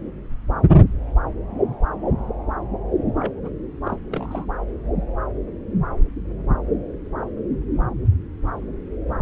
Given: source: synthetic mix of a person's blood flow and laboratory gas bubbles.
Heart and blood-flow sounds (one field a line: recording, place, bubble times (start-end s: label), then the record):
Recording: Doppler ultrasound of blood flow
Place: subclavian vein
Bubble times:
3.19-3.40 s: bubbles
3.43-3.50 s: bubbles
3.84-3.96 s: bubbles
4.10-4.46 s: bubbles
From the record:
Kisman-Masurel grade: 211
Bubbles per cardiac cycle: several, 3 to 8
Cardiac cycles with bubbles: 1 to 10%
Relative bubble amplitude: barely perceptible (0.100 to 0.250)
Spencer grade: 1 (occasional bubble signal discernible with the cardiac motion signal, with majority of cardiac periods free of bubbles)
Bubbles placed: anywhere in the cardiac cycle